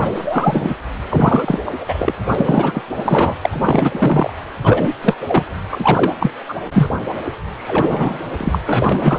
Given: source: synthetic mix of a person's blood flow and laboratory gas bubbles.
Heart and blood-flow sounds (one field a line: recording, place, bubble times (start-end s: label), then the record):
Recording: Doppler ultrasound of blood flow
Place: precordium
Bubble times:
0.00-0.08 s: bubbles
0.15-0.75 s: bubbles
1.09-1.61 s: bubbles
1.66-1.84 s: bubbles
1.88-2.14 s: bubbles
2.26-2.81 s: bubbles
2.96-3.34 s: bubbles
3.42-4.30 s: bubbles
4.64-4.95 s: bubbles
5.02-5.15 s: bubbles
5.27-5.45 s: bubbles
5.71-6.11 s: bubbles
6.19-6.31 s: bubbles
6.49-6.55 s: bubbles
6.73-6.89 s: bubbles
7.56-8.19 s: bubbles
8.38-8.59 s: bubbles
8.66-9.19 s: bubbles
From the record:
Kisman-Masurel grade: 343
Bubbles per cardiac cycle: rolling drumbeat, 9 or more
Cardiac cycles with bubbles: 100%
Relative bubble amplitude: loud (0.450 to 0.775)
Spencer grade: 3 (all of the cardiac periods contain showers or single bubble signals, but not dominating or overriding the cardiac motion signals)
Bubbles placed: anywhere in the cardiac cycle